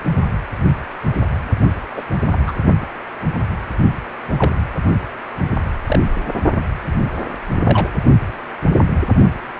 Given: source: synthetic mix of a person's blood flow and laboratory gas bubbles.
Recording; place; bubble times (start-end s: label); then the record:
Doppler ultrasound of blood flow; precordium
1.96-2.03 s: bubbles
2.30-2.52 s: bubbles
2.80-2.87 s: bubbles
4.37-4.55 s: bubbles
5.87-6.00 s: bubbles
7.63-7.89 s: bubbles
From the record:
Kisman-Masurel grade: 122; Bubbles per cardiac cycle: 1 to 2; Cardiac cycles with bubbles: 10 to 50%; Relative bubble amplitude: moderate (0.250 to 0.450); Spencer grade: 2 (many but less than half of the cardiac periods contain bubble signals, singularly or in groups); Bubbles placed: only in the low amplitude regions of the cardiac cycle